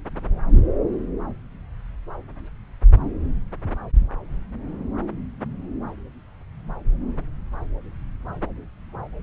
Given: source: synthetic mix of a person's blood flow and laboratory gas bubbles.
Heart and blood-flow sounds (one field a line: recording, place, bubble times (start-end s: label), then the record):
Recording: Doppler ultrasound of blood flow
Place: subclavian vein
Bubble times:
no bubbles
From the record:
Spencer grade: 0 (complete lack of bubble signals)